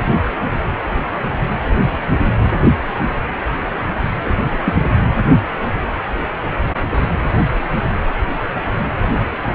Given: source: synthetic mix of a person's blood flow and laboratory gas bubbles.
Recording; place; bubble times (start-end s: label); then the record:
Doppler ultrasound of blood flow; precordium
4.65-4.75 s: bubbles
From the record:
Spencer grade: 1 (occasional bubble signal discernible with the cardiac motion signal, with majority of cardiac periods free of bubbles); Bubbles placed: anywhere in the cardiac cycle